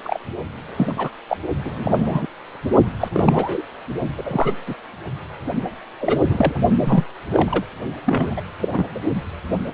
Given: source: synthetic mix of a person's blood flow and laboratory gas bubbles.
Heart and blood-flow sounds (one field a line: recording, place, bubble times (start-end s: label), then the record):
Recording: Doppler ultrasound of blood flow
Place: precordium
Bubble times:
0.04-0.19 s: bubbles
0.76-0.93 s: bubbles
0.97-1.10 s: bubbles
1.29-1.37 s: bubbles
1.64-2.27 s: bubbles
3.00-3.08 s: bubbles
3.13-3.62 s: bubbles
4.17-4.22 s: bubbles
4.25-4.52 s: bubbles
4.66-4.75 s: bubbles
6.00-6.21 s: bubbles
6.25-6.61 s: bubbles
6.80-7.04 s: bubbles
7.31-7.63 s: bubbles
8.04-8.41 s: bubbles
8.59-8.69 s: bubbles
8.72-8.87 s: bubbles
8.95-9.00 s: bubbles
From the record:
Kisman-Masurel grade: 243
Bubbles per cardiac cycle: several, 3 to 8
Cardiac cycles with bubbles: 100%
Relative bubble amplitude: loud (0.450 to 0.775)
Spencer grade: 3 (all of the cardiac periods contain showers or single bubble signals, but not dominating or overriding the cardiac motion signals)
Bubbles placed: only in the low amplitude regions of the cardiac cycle